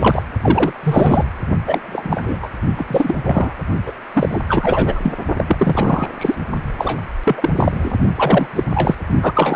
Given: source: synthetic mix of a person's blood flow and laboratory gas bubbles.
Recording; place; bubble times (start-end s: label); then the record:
Doppler ultrasound of blood flow; precordium
0.00-0.23 s: bubbles
0.41-0.72 s: bubbles
0.83-1.24 s: bubbles
1.67-2.38 s: bubbles
2.42-2.49 s: bubbles
2.77-3.16 s: bubbles
3.24-3.55 s: bubbles
3.86-3.92 s: bubbles
4.13-4.43 s: bubbles
4.48-5.13 s: bubbles
5.37-5.44 s: bubbles
5.48-6.07 s: bubbles
6.17-6.35 s: bubbles
6.78-7.01 s: bubbles
7.24-7.50 s: bubbles
7.57-7.96 s: bubbles
8.16-8.47 s: bubbles
8.54-8.63 s: bubbles
8.74-8.95 s: bubbles
9.22-9.56 s: bubbles
From the record:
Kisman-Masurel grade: 343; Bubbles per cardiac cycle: rolling drumbeat, 9 or more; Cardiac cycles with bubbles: 100%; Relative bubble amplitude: loud (0.450 to 0.775); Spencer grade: 3 (all of the cardiac periods contain showers or single bubble signals, but not dominating or overriding the cardiac motion signals); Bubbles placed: only in the low amplitude regions of the cardiac cycle